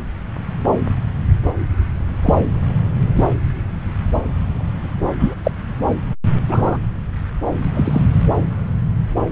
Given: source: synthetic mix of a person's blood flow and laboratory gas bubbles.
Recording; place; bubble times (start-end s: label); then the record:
Doppler ultrasound of blood flow; subclavian vein
2.23-2.35 s: bubbles
3.15-3.25 s: bubbles
5.18-5.35 s: bubbles
5.43-5.51 s: bubbles
6.49-6.78 s: bubbles
7.74-8.02 s: bubbles
From the record:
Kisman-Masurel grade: 123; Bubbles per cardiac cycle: 1 to 2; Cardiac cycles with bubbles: 10 to 50%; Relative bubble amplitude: loud (0.450 to 0.775); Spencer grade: 2 (many but less than half of the cardiac periods contain bubble signals, singularly or in groups); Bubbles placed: anywhere in the cardiac cycle